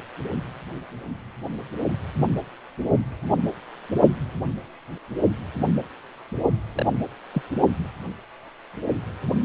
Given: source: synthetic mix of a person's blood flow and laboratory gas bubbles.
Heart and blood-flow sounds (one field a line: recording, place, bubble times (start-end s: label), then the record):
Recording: Doppler ultrasound of blood flow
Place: precordium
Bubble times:
6.75-6.86 s: bubbles
7.34-7.42 s: bubbles
From the record:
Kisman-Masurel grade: 112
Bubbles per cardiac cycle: 1 to 2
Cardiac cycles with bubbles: 1 to 10%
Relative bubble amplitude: moderate (0.250 to 0.450)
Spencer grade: 1 (occasional bubble signal discernible with the cardiac motion signal, with majority of cardiac periods free of bubbles)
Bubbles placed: only in the low amplitude regions of the cardiac cycle